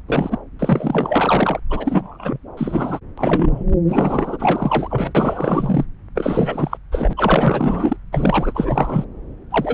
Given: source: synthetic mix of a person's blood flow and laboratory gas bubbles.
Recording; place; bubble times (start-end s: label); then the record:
Doppler ultrasound of blood flow; subclavian vein
0.08-0.38 s: bubbles
0.59-1.60 s: bubbles
1.70-2.38 s: bubbles
2.57-2.99 s: bubbles
3.17-3.64 s: bubbles
3.88-5.86 s: bubbles
6.15-6.78 s: bubbles
6.92-7.13 s: bubbles
7.17-7.96 s: bubbles
8.12-9.04 s: bubbles
9.51-9.74 s: bubbles
From the record:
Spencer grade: 4 (maximum detectable bubble signal sounding continuously throughout systole and diastole of every cardiac period, and overriding the amplitude of the normal cardiac signals); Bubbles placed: anywhere in the cardiac cycle